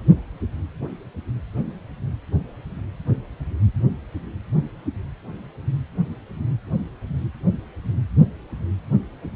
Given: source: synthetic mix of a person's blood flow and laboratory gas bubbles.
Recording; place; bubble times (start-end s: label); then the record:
Doppler ultrasound of blood flow; precordium
no bubbles
From the record:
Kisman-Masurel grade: 000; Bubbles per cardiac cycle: 0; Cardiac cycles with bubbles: 0%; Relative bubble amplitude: no bubbles discernible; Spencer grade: 0 (complete lack of bubble signals)